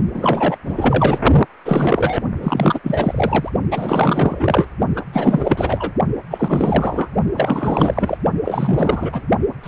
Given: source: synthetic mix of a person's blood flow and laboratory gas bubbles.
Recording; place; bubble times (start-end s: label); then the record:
Doppler ultrasound of blood flow; precordium
0.13-0.56 s: bubbles
0.65-1.19 s: bubbles
1.65-2.21 s: bubbles
2.40-2.80 s: bubbles
2.83-3.50 s: bubbles
3.71-4.69 s: bubbles
4.95-5.04 s: bubbles
5.12-5.92 s: bubbles
6.30-7.08 s: bubbles
7.35-8.18 s: bubbles
8.45-9.22 s: bubbles
9.63-9.68 s: bubbles
From the record:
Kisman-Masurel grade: 444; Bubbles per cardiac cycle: continuous sound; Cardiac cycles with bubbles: 100%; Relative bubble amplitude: maximal (0.775 to 0.999); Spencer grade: 4 (maximum detectable bubble signal sounding continuously throughout systole and diastole of every cardiac period, and overriding the amplitude of the normal cardiac signals); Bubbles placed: only in the low amplitude regions of the cardiac cycle